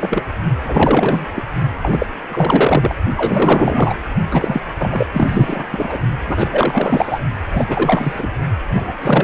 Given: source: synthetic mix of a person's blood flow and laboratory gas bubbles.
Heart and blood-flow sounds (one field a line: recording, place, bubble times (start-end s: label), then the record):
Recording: Doppler ultrasound of blood flow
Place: precordium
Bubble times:
0.00-0.24 s: bubbles
0.64-1.26 s: bubbles
1.35-1.43 s: bubbles
1.82-2.06 s: bubbles
2.29-2.95 s: bubbles
3.16-3.95 s: bubbles
4.30-4.61 s: bubbles
4.79-5.07 s: bubbles
5.13-5.65 s: bubbles
5.72-6.00 s: bubbles
6.26-7.19 s: bubbles
7.53-7.65 s: bubbles
7.68-8.27 s: bubbles
8.70-8.93 s: bubbles
9.01-9.24 s: bubbles
From the record:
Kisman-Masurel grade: 444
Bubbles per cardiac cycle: continuous sound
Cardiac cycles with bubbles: 100%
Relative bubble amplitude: maximal (0.775 to 0.999)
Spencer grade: 4 (maximum detectable bubble signal sounding continuously throughout systole and diastole of every cardiac period, and overriding the amplitude of the normal cardiac signals)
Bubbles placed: only in the low amplitude regions of the cardiac cycle